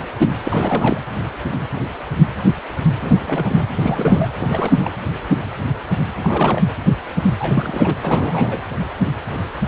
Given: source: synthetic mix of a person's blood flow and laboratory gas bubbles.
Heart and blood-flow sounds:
Doppler ultrasound of blood flow; precordium
0.43-1.00 s: bubbles
2.99-3.67 s: bubbles
3.77-4.30 s: bubbles
4.38-4.92 s: bubbles
6.20-6.63 s: bubbles
7.38-7.95 s: bubbles
8.02-8.61 s: bubbles
From the record:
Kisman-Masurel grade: 332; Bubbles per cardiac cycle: rolling drumbeat, 9 or more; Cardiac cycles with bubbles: 50 to 99%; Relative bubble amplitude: moderate (0.250 to 0.450); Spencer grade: 3 (all of the cardiac periods contain showers or single bubble signals, but not dominating or overriding the cardiac motion signals); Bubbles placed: anywhere in the cardiac cycle

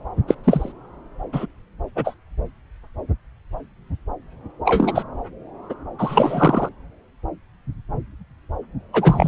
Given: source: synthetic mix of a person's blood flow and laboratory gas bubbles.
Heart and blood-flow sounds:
Doppler ultrasound of blood flow; subclavian vein
0.28-0.34 s: bubbles
0.44-0.73 s: bubbles
1.32-1.46 s: bubbles
1.96-2.14 s: bubbles
4.65-5.03 s: bubbles
5.69-5.74 s: bubbles
5.99-6.69 s: bubbles
8.93-9.28 s: bubbles
From the record:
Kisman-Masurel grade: 233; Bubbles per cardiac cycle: several, 3 to 8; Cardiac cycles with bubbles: 50 to 99%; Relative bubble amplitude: loud (0.450 to 0.775); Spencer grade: 3 (all of the cardiac periods contain showers or single bubble signals, but not dominating or overriding the cardiac motion signals); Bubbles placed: anywhere in the cardiac cycle

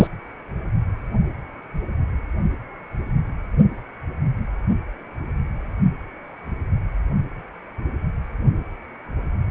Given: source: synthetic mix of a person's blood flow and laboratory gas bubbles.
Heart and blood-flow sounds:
Doppler ultrasound of blood flow; precordium
0.00-0.07 s: bubbles
From the record:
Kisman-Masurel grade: 213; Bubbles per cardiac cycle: several, 3 to 8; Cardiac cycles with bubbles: 1 to 10%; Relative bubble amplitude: loud (0.450 to 0.775); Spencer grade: 1 (occasional bubble signal discernible with the cardiac motion signal, with majority of cardiac periods free of bubbles); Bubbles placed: anywhere in the cardiac cycle

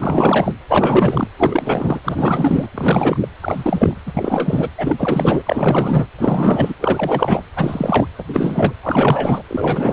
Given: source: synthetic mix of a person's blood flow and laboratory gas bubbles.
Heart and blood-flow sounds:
Doppler ultrasound of blood flow; precordium
0.00-0.52 s: bubbles
0.68-1.27 s: bubbles
1.38-2.00 s: bubbles
2.04-2.71 s: bubbles
2.74-3.29 s: bubbles
3.42-3.94 s: bubbles
4.05-4.70 s: bubbles
4.78-5.42 s: bubbles
5.45-6.07 s: bubbles
6.17-6.73 s: bubbles
6.79-7.42 s: bubbles
7.56-8.06 s: bubbles
8.19-8.24 s: bubbles
8.28-8.73 s: bubbles
8.83-9.43 s: bubbles
9.47-9.93 s: bubbles
From the record:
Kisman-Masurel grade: 444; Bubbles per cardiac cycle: continuous sound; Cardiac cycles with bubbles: 100%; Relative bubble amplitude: maximal (0.775 to 0.999); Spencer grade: 4 (maximum detectable bubble signal sounding continuously throughout systole and diastole of every cardiac period, and overriding the amplitude of the normal cardiac signals); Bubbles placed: anywhere in the cardiac cycle

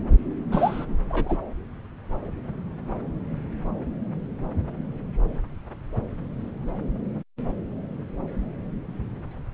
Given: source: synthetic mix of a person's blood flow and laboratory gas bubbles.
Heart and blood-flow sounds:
Doppler ultrasound of blood flow; subclavian vein
0.52-0.86 s: bubbles
1.08-1.38 s: bubbles
From the record:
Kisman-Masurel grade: 212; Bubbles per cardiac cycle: several, 3 to 8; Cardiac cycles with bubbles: 1 to 10%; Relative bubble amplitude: moderate (0.250 to 0.450); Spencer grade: 1 (occasional bubble signal discernible with the cardiac motion signal, with majority of cardiac periods free of bubbles); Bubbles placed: anywhere in the cardiac cycle

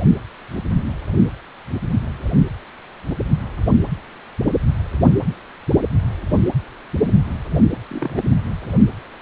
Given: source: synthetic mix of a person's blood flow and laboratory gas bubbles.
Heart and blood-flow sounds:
Doppler ultrasound of blood flow; precordium
7.52-7.61 s: bubbles
7.90-8.22 s: bubbles
From the record:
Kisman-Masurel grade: 111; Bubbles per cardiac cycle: 1 to 2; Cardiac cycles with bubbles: 1 to 10%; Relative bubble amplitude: barely perceptible (0.100 to 0.250); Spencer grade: 1 (occasional bubble signal discernible with the cardiac motion signal, with majority of cardiac periods free of bubbles); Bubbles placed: anywhere in the cardiac cycle

